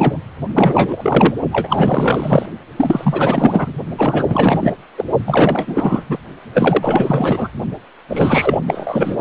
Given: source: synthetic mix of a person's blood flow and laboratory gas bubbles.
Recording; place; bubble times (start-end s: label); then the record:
Doppler ultrasound of blood flow; precordium
0.00-0.17 s: bubbles
0.55-1.33 s: bubbles
1.51-2.46 s: bubbles
2.76-3.73 s: bubbles
3.98-4.73 s: bubbles
4.97-5.05 s: bubbles
5.26-6.04 s: bubbles
6.08-6.17 s: bubbles
6.53-7.47 s: bubbles
8.09-8.62 s: bubbles
8.67-9.16 s: bubbles
From the record:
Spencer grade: 4 (maximum detectable bubble signal sounding continuously throughout systole and diastole of every cardiac period, and overriding the amplitude of the normal cardiac signals); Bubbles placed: only in the low amplitude regions of the cardiac cycle